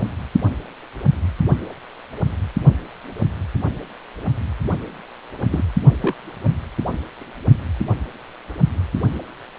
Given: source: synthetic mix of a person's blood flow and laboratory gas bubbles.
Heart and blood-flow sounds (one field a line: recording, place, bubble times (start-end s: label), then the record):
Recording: Doppler ultrasound of blood flow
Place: precordium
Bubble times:
0.00-0.02 s: bubbles
5.31-5.75 s: bubbles
6.00-6.15 s: bubbles
From the record:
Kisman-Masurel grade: 122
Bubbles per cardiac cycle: 1 to 2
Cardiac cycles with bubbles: 10 to 50%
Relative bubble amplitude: moderate (0.250 to 0.450)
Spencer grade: 2 (many but less than half of the cardiac periods contain bubble signals, singularly or in groups)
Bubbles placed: anywhere in the cardiac cycle